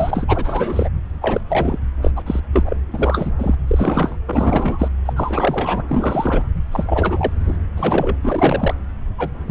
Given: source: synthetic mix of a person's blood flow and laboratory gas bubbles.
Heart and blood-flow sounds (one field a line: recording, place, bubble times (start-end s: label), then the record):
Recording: Doppler ultrasound of blood flow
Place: subclavian vein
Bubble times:
0.00-0.24 s: bubbles
0.28-0.90 s: bubbles
1.21-1.41 s: bubbles
1.48-1.79 s: bubbles
2.02-2.12 s: bubbles
2.15-2.23 s: bubbles
2.26-2.40 s: bubbles
2.52-2.77 s: bubbles
2.94-3.31 s: bubbles
3.38-3.55 s: bubbles
3.67-4.16 s: bubbles
4.26-4.88 s: bubbles
5.05-5.13 s: bubbles
5.16-5.83 s: bubbles
5.88-6.42 s: bubbles
6.71-7.55 s: bubbles
7.76-8.16 s: bubbles
8.22-8.75 s: bubbles
9.18-9.30 s: bubbles
9.46-9.51 s: bubbles
From the record:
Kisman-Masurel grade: 343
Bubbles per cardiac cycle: rolling drumbeat, 9 or more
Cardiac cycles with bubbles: 100%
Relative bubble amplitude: loud (0.450 to 0.775)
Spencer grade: 3 (all of the cardiac periods contain showers or single bubble signals, but not dominating or overriding the cardiac motion signals)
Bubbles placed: anywhere in the cardiac cycle